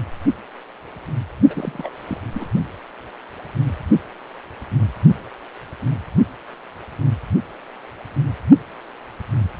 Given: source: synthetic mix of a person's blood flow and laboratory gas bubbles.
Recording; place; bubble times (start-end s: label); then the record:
Doppler ultrasound of blood flow; precordium
1.50-1.89 s: bubbles
2.07-2.19 s: bubbles
2.33-2.50 s: bubbles
From the record:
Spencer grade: 1 (occasional bubble signal discernible with the cardiac motion signal, with majority of cardiac periods free of bubbles); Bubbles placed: only in the low amplitude regions of the cardiac cycle